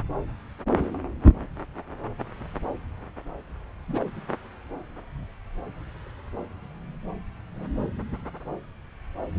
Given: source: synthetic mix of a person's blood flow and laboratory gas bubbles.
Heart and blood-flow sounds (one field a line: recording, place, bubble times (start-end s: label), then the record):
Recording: Doppler ultrasound of blood flow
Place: subclavian vein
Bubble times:
3.88-4.08 s: bubbles
From the record:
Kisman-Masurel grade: 211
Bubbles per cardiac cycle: several, 3 to 8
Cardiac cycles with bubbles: 1 to 10%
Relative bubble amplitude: barely perceptible (0.100 to 0.250)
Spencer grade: 1 (occasional bubble signal discernible with the cardiac motion signal, with majority of cardiac periods free of bubbles)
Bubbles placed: anywhere in the cardiac cycle